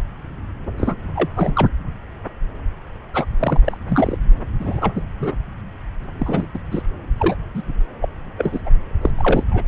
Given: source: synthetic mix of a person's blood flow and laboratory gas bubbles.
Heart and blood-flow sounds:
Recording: Doppler ultrasound of blood flow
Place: subclavian vein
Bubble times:
0.78-0.95 s: bubbles
1.15-1.29 s: bubbles
1.35-1.68 s: bubbles
3.14-3.26 s: bubbles
3.40-3.60 s: bubbles
3.65-3.77 s: bubbles
3.88-4.18 s: bubbles
4.59-5.02 s: bubbles
5.19-5.32 s: bubbles
6.03-6.07 s: bubbles
6.19-6.46 s: bubbles
6.53-6.58 s: bubbles
6.71-6.83 s: bubbles
7.17-7.35 s: bubbles
7.54-7.61 s: bubbles
8.02-8.09 s: bubbles
8.38-8.61 s: bubbles
8.66-8.70 s: bubbles
9.02-9.11 s: bubbles
9.19-9.44 s: bubbles
9.52-9.62 s: bubbles
From the record:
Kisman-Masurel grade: 232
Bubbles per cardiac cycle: several, 3 to 8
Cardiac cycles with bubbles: 50 to 99%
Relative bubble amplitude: moderate (0.250 to 0.450)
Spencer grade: 3 (all of the cardiac periods contain showers or single bubble signals, but not dominating or overriding the cardiac motion signals)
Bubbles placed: anywhere in the cardiac cycle

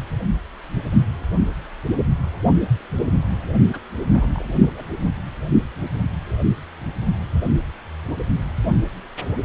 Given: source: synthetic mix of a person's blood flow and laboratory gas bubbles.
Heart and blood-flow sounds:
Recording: Doppler ultrasound of blood flow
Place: precordium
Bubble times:
3.73-3.80 s: bubbles
4.13-4.28 s: bubbles
4.34-4.84 s: bubbles
From the record:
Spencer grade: 2 (many but less than half of the cardiac periods contain bubble signals, singularly or in groups)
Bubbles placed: only in the low amplitude regions of the cardiac cycle

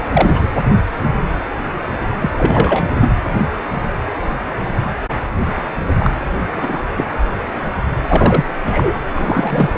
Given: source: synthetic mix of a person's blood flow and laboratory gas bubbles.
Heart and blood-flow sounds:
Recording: Doppler ultrasound of blood flow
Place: precordium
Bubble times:
0.13-0.47 s: bubbles
2.20-2.31 s: bubbles
2.38-2.84 s: bubbles
3.01-3.12 s: bubbles
5.98-6.10 s: bubbles
6.52-6.82 s: bubbles
6.96-7.06 s: bubbles
8.09-8.46 s: bubbles
8.64-8.98 s: bubbles
9.15-9.78 s: bubbles
From the record:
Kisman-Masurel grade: 233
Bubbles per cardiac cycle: several, 3 to 8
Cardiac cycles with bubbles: 50 to 99%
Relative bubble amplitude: loud (0.450 to 0.775)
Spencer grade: 3 (all of the cardiac periods contain showers or single bubble signals, but not dominating or overriding the cardiac motion signals)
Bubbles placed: anywhere in the cardiac cycle

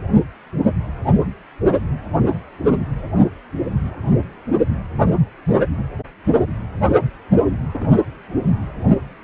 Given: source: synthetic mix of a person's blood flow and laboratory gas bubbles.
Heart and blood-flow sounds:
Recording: Doppler ultrasound of blood flow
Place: precordium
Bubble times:
7.74-7.89 s: bubbles
From the record:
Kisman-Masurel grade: 111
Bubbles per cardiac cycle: 1 to 2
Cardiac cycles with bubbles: 1 to 10%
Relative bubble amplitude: barely perceptible (0.100 to 0.250)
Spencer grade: 1 (occasional bubble signal discernible with the cardiac motion signal, with majority of cardiac periods free of bubbles)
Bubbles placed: anywhere in the cardiac cycle

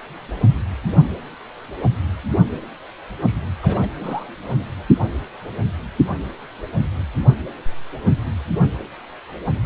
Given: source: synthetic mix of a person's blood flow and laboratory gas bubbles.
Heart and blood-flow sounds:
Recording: Doppler ultrasound of blood flow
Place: precordium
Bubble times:
3.22-3.34 s: bubbles
3.62-3.88 s: bubbles
4.00-4.27 s: bubbles
From the record:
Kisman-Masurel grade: 221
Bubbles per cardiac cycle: several, 3 to 8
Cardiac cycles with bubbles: 10 to 50%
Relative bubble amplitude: barely perceptible (0.100 to 0.250)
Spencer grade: 2 (many but less than half of the cardiac periods contain bubble signals, singularly or in groups)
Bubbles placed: anywhere in the cardiac cycle

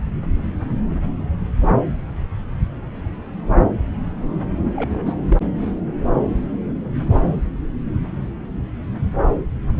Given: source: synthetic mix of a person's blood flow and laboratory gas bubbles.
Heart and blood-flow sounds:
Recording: Doppler ultrasound of blood flow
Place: subclavian vein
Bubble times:
4.75-5.02 s: bubbles
5.04-5.12 s: bubbles
5.26-5.38 s: bubbles
From the record:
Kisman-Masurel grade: 211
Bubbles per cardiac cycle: several, 3 to 8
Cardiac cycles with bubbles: 1 to 10%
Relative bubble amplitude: barely perceptible (0.100 to 0.250)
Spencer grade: 1 (occasional bubble signal discernible with the cardiac motion signal, with majority of cardiac periods free of bubbles)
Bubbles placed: anywhere in the cardiac cycle

